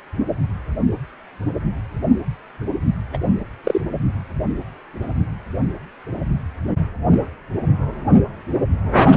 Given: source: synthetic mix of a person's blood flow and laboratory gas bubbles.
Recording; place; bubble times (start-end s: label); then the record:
Doppler ultrasound of blood flow; precordium
3.13-3.18 s: bubbles
3.64-3.81 s: bubbles
From the record:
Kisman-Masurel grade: 113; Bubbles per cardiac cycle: 1 to 2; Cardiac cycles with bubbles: 1 to 10%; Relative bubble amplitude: loud (0.450 to 0.775); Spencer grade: 1 (occasional bubble signal discernible with the cardiac motion signal, with majority of cardiac periods free of bubbles); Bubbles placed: anywhere in the cardiac cycle